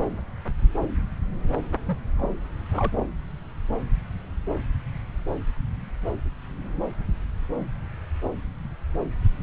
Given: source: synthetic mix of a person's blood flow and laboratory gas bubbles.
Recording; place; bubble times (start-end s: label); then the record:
Doppler ultrasound of blood flow; subclavian vein
1.86-1.98 s: bubbles
2.17-2.52 s: bubbles
2.71-3.06 s: bubbles
From the record:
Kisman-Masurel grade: 211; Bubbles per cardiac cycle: several, 3 to 8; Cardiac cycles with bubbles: 1 to 10%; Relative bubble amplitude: barely perceptible (0.100 to 0.250); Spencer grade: 1 (occasional bubble signal discernible with the cardiac motion signal, with majority of cardiac periods free of bubbles); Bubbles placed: anywhere in the cardiac cycle